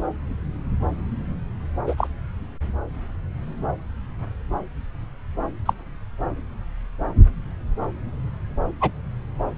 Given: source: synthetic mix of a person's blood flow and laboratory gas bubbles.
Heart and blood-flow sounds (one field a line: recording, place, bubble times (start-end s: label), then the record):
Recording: Doppler ultrasound of blood flow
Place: subclavian vein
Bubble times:
1.86-2.07 s: bubbles
5.66-5.74 s: bubbles
8.80-8.90 s: bubbles
From the record:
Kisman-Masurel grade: 122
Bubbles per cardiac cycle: 1 to 2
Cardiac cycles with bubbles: 10 to 50%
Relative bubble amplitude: moderate (0.250 to 0.450)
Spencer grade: 2 (many but less than half of the cardiac periods contain bubble signals, singularly or in groups)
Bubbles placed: anywhere in the cardiac cycle